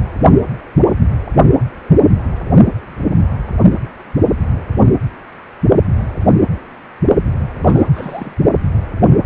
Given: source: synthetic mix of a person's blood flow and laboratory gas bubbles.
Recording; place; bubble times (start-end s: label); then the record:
Doppler ultrasound of blood flow; precordium
7.63-8.36 s: bubbles
From the record:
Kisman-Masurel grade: 211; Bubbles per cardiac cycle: several, 3 to 8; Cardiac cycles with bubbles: 1 to 10%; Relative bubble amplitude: barely perceptible (0.100 to 0.250); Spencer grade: 1 (occasional bubble signal discernible with the cardiac motion signal, with majority of cardiac periods free of bubbles); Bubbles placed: only in the low amplitude regions of the cardiac cycle